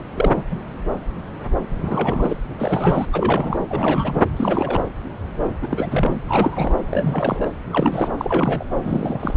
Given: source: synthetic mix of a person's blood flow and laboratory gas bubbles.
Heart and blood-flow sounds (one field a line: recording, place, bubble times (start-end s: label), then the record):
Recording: Doppler ultrasound of blood flow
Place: subclavian vein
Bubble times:
0.14-0.45 s: bubbles
0.51-0.58 s: bubbles
1.69-2.36 s: bubbles
2.57-3.06 s: bubbles
3.12-3.59 s: bubbles
3.68-4.21 s: bubbles
4.36-4.82 s: bubbles
5.62-6.21 s: bubbles
6.29-6.81 s: bubbles
6.91-7.46 s: bubbles
7.73-8.64 s: bubbles
8.84-9.34 s: bubbles
From the record:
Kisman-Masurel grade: 332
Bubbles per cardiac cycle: rolling drumbeat, 9 or more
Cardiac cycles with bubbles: 50 to 99%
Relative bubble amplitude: moderate (0.250 to 0.450)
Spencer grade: 3 (all of the cardiac periods contain showers or single bubble signals, but not dominating or overriding the cardiac motion signals)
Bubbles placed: anywhere in the cardiac cycle